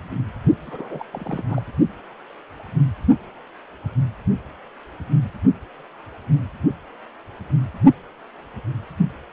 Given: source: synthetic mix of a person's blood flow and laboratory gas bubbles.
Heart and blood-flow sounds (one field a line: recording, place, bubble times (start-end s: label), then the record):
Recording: Doppler ultrasound of blood flow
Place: precordium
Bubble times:
0.66-1.05 s: bubbles
1.13-1.45 s: bubbles
1.49-1.62 s: bubbles
From the record:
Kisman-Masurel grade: 221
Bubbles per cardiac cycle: several, 3 to 8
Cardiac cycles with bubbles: 10 to 50%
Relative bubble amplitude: barely perceptible (0.100 to 0.250)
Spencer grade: 2 (many but less than half of the cardiac periods contain bubble signals, singularly or in groups)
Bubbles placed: only in the low amplitude regions of the cardiac cycle